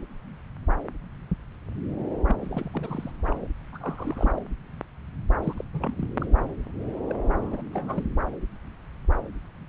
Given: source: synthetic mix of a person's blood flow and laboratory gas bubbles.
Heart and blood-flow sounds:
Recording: Doppler ultrasound of blood flow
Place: subclavian vein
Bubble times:
2.26-2.35 s: bubbles
2.40-2.71 s: bubbles
2.73-3.11 s: bubbles
3.26-3.47 s: bubbles
3.73-4.43 s: bubbles
5.43-5.54 s: bubbles
5.57-5.64 s: bubbles
5.74-6.08 s: bubbles
6.20-6.27 s: bubbles
7.07-7.15 s: bubbles
7.35-7.62 s: bubbles
7.74-8.04 s: bubbles
From the record:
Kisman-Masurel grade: 221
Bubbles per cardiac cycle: several, 3 to 8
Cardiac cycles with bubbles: 10 to 50%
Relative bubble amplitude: barely perceptible (0.100 to 0.250)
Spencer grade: 2 (many but less than half of the cardiac periods contain bubble signals, singularly or in groups)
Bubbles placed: anywhere in the cardiac cycle

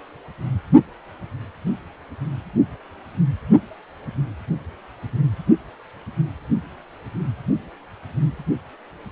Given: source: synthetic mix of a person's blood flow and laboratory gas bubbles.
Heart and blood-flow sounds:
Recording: Doppler ultrasound of blood flow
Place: precordium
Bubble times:
no bubbles
From the record:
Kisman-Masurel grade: 000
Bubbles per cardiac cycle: 0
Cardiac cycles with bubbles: 0%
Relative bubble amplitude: no bubbles discernible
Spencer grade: 0 (complete lack of bubble signals)

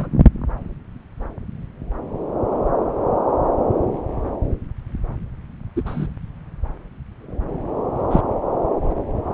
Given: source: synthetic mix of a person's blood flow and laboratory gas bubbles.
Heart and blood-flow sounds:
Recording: Doppler ultrasound of blood flow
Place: subclavian vein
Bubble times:
0.00-0.09 s: bubbles
5.76-5.82 s: bubbles
5.85-6.07 s: bubbles
8.10-8.21 s: bubbles
From the record:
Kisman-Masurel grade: 122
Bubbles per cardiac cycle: 1 to 2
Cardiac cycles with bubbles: 10 to 50%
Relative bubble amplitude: moderate (0.250 to 0.450)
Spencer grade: 2 (many but less than half of the cardiac periods contain bubble signals, singularly or in groups)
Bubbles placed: anywhere in the cardiac cycle

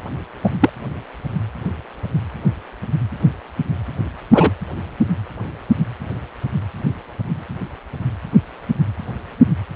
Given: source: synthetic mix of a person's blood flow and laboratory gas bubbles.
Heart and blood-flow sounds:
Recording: Doppler ultrasound of blood flow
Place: precordium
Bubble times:
0.43-0.49 s: bubbles
0.59-0.69 s: bubbles
4.33-4.51 s: bubbles
From the record:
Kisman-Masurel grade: 123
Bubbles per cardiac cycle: 1 to 2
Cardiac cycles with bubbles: 10 to 50%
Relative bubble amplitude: loud (0.450 to 0.775)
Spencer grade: 2 (many but less than half of the cardiac periods contain bubble signals, singularly or in groups)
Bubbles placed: anywhere in the cardiac cycle

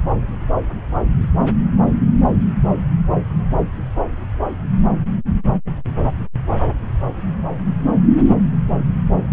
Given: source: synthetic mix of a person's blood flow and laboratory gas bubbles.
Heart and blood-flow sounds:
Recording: Doppler ultrasound of blood flow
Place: subclavian vein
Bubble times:
no bubbles
From the record:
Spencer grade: 0 (complete lack of bubble signals)

